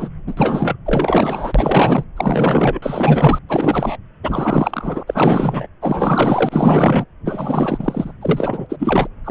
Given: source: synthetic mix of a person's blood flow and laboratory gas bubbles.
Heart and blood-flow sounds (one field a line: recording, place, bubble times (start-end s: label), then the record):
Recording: Doppler ultrasound of blood flow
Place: subclavian vein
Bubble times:
0.00-0.09 s: bubbles
0.27-0.34 s: bubbles
0.37-0.76 s: bubbles
0.86-2.04 s: bubbles
2.17-2.79 s: bubbles
2.82-3.39 s: bubbles
3.49-3.97 s: bubbles
4.23-5.03 s: bubbles
5.07-5.67 s: bubbles
5.81-7.05 s: bubbles
7.24-8.12 s: bubbles
8.21-8.66 s: bubbles
8.69-9.07 s: bubbles
9.24-9.30 s: bubbles
From the record:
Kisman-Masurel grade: 444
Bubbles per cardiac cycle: continuous sound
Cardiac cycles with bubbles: 100%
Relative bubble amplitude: maximal (0.775 to 0.999)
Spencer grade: 4 (maximum detectable bubble signal sounding continuously throughout systole and diastole of every cardiac period, and overriding the amplitude of the normal cardiac signals)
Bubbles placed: anywhere in the cardiac cycle